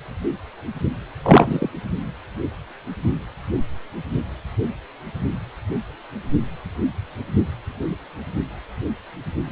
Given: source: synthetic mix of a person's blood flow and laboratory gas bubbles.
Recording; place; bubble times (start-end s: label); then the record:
Doppler ultrasound of blood flow; precordium
1.23-1.70 s: bubbles
From the record:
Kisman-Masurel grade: 223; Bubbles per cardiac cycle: several, 3 to 8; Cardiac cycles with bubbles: 10 to 50%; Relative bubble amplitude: loud (0.450 to 0.775); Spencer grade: 2 (many but less than half of the cardiac periods contain bubble signals, singularly or in groups); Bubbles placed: only in the low amplitude regions of the cardiac cycle